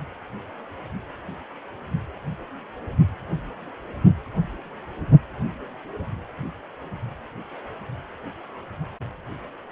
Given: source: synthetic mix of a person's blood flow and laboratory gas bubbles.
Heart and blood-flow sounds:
Doppler ultrasound of blood flow; precordium
no bubbles
From the record:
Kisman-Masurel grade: 000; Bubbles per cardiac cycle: 0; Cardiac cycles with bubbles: 0%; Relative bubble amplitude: no bubbles discernible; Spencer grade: 0 (complete lack of bubble signals)

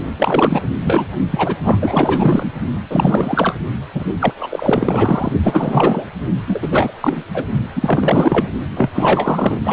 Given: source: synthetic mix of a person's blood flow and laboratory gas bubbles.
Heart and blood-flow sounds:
Doppler ultrasound of blood flow; precordium
0.18-0.66 s: bubbles
0.81-1.07 s: bubbles
1.30-1.56 s: bubbles
1.63-2.50 s: bubbles
2.90-3.55 s: bubbles
3.94-4.04 s: bubbles
4.20-4.33 s: bubbles
4.38-5.32 s: bubbles
5.43-6.05 s: bubbles
6.46-6.92 s: bubbles
7.00-7.23 s: bubbles
7.34-7.45 s: bubbles
7.75-8.48 s: bubbles
8.76-8.90 s: bubbles
8.94-9.58 s: bubbles
9.64-9.73 s: bubbles
From the record:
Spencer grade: 4 (maximum detectable bubble signal sounding continuously throughout systole and diastole of every cardiac period, and overriding the amplitude of the normal cardiac signals); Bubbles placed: only in the low amplitude regions of the cardiac cycle

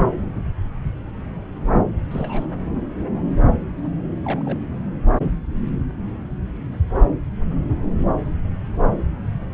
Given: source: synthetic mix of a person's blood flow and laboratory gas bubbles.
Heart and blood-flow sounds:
Doppler ultrasound of blood flow; subclavian vein
0.17-0.42 s: bubbles
2.10-2.46 s: bubbles
4.25-4.66 s: bubbles
9.52-9.54 s: bubbles
From the record:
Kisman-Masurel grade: 121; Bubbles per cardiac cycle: 1 to 2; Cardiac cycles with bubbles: 10 to 50%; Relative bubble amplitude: barely perceptible (0.100 to 0.250); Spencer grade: 2 (many but less than half of the cardiac periods contain bubble signals, singularly or in groups); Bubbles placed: anywhere in the cardiac cycle

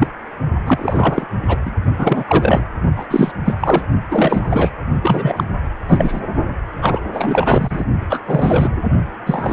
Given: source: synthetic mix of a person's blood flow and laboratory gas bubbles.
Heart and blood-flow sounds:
Doppler ultrasound of blood flow; precordium
0.00-0.07 s: bubbles
0.66-1.25 s: bubbles
1.48-1.58 s: bubbles
1.65-1.71 s: bubbles
1.98-2.62 s: bubbles
2.96-3.07 s: bubbles
3.10-3.31 s: bubbles
3.45-3.54 s: bubbles
3.60-3.83 s: bubbles
4.11-4.71 s: bubbles
5.02-5.44 s: bubbles
5.88-6.21 s: bubbles
6.79-7.01 s: bubbles
7.12-7.84 s: bubbles
8.10-8.22 s: bubbles
8.26-8.71 s: bubbles
9.26-9.53 s: bubbles
From the record:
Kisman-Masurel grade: 343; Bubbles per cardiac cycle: rolling drumbeat, 9 or more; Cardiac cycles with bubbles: 100%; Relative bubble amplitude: loud (0.450 to 0.775); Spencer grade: 3 (all of the cardiac periods contain showers or single bubble signals, but not dominating or overriding the cardiac motion signals); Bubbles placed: only in the low amplitude regions of the cardiac cycle

